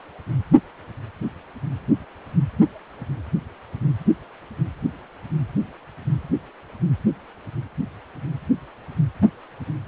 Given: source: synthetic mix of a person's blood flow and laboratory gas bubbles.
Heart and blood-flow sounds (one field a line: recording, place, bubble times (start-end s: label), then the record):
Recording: Doppler ultrasound of blood flow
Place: precordium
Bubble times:
no bubbles
From the record:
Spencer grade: 0 (complete lack of bubble signals)